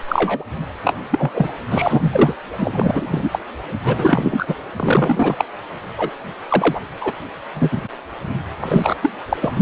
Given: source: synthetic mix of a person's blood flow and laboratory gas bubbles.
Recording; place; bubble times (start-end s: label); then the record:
Doppler ultrasound of blood flow; precordium
0.08-0.43 s: bubbles
0.84-0.96 s: bubbles
1.10-1.31 s: bubbles
1.34-1.52 s: bubbles
1.72-2.33 s: bubbles
2.58-3.39 s: bubbles
3.83-4.55 s: bubbles
4.76-5.45 s: bubbles
5.96-6.11 s: bubbles
6.49-6.81 s: bubbles
7.00-7.13 s: bubbles
7.54-7.81 s: bubbles
8.60-8.95 s: bubbles
9.02-9.12 s: bubbles
9.29-9.37 s: bubbles
9.40-9.52 s: bubbles
From the record:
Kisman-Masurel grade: 243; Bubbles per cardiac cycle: several, 3 to 8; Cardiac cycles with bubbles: 100%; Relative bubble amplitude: loud (0.450 to 0.775); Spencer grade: 3 (all of the cardiac periods contain showers or single bubble signals, but not dominating or overriding the cardiac motion signals); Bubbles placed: anywhere in the cardiac cycle